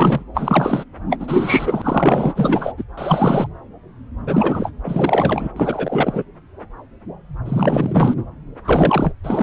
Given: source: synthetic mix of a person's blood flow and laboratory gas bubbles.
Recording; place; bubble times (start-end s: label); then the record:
Doppler ultrasound of blood flow; subclavian vein
0.00-0.24 s: bubbles
0.34-0.84 s: bubbles
1.09-1.17 s: bubbles
1.19-2.73 s: bubbles
2.77-2.84 s: bubbles
2.97-3.47 s: bubbles
4.27-4.72 s: bubbles
4.83-5.49 s: bubbles
5.56-6.24 s: bubbles
7.45-8.14 s: bubbles
8.64-9.15 s: bubbles
9.24-9.43 s: bubbles
From the record:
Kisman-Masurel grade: 333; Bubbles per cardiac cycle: rolling drumbeat, 9 or more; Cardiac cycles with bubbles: 50 to 99%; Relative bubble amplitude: loud (0.450 to 0.775); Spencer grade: 3 (all of the cardiac periods contain showers or single bubble signals, but not dominating or overriding the cardiac motion signals); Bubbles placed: anywhere in the cardiac cycle